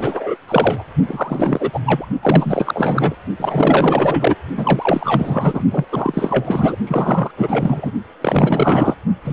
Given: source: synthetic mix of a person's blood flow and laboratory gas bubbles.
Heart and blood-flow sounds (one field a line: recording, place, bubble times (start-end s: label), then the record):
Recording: Doppler ultrasound of blood flow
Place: precordium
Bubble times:
0.00-0.36 s: bubbles
0.48-0.85 s: bubbles
1.05-1.80 s: bubbles
1.85-2.05 s: bubbles
2.23-3.15 s: bubbles
3.39-4.35 s: bubbles
4.57-5.62 s: bubbles
5.71-5.85 s: bubbles
5.92-6.76 s: bubbles
6.87-7.31 s: bubbles
7.37-7.92 s: bubbles
8.21-8.95 s: bubbles
9.24-9.33 s: bubbles
From the record:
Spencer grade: 4 (maximum detectable bubble signal sounding continuously throughout systole and diastole of every cardiac period, and overriding the amplitude of the normal cardiac signals)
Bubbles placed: only in the low amplitude regions of the cardiac cycle